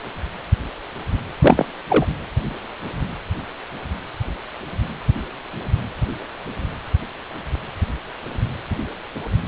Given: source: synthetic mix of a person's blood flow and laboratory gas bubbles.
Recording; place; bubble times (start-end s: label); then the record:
Doppler ultrasound of blood flow; precordium
1.41-1.66 s: bubbles
1.89-2.06 s: bubbles
From the record:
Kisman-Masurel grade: 213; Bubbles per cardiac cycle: several, 3 to 8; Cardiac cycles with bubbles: 1 to 10%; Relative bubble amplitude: loud (0.450 to 0.775); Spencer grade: 1 (occasional bubble signal discernible with the cardiac motion signal, with majority of cardiac periods free of bubbles); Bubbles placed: anywhere in the cardiac cycle